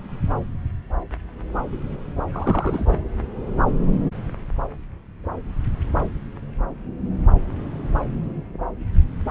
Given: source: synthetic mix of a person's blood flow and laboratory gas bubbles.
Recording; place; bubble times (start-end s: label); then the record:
Doppler ultrasound of blood flow; subclavian vein
2.32-3.04 s: bubbles
From the record:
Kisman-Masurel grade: 212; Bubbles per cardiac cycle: several, 3 to 8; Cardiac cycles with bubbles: 1 to 10%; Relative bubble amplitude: moderate (0.250 to 0.450); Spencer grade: 1 (occasional bubble signal discernible with the cardiac motion signal, with majority of cardiac periods free of bubbles); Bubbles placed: anywhere in the cardiac cycle